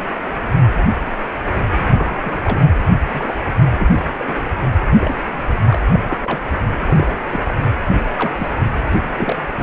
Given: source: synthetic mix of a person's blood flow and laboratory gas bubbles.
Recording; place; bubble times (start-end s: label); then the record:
Doppler ultrasound of blood flow; precordium
1.81-1.88 s: bubbles
1.93-2.18 s: bubbles
2.24-2.65 s: bubbles
3.12-3.35 s: bubbles
3.79-3.88 s: bubbles
3.99-4.07 s: bubbles
4.19-4.35 s: bubbles
4.98-5.16 s: bubbles
5.21-5.37 s: bubbles
5.69-5.80 s: bubbles
5.93-6.00 s: bubbles
6.06-6.20 s: bubbles
6.23-6.43 s: bubbles
6.79-7.13 s: bubbles
7.31-7.52 s: bubbles
7.92-8.03 s: bubbles
8.17-8.35 s: bubbles
8.38-8.53 s: bubbles
8.88-8.97 s: bubbles
9.18-9.36 s: bubbles
9.58-9.62 s: bubbles
From the record:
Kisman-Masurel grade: 232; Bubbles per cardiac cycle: several, 3 to 8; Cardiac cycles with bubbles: 50 to 99%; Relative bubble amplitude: moderate (0.250 to 0.450); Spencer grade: 3 (all of the cardiac periods contain showers or single bubble signals, but not dominating or overriding the cardiac motion signals); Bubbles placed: anywhere in the cardiac cycle